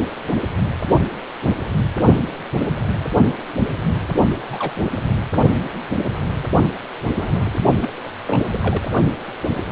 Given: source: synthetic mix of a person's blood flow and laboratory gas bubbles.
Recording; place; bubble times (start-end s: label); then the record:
Doppler ultrasound of blood flow; precordium
4.49-4.86 s: bubbles
7.15-7.61 s: bubbles
7.81-7.90 s: bubbles
8.04-8.10 s: bubbles
8.26-8.43 s: bubbles
8.50-8.59 s: bubbles
8.62-8.88 s: bubbles
From the record:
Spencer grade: 2 (many but less than half of the cardiac periods contain bubble signals, singularly or in groups); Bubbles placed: only in the low amplitude regions of the cardiac cycle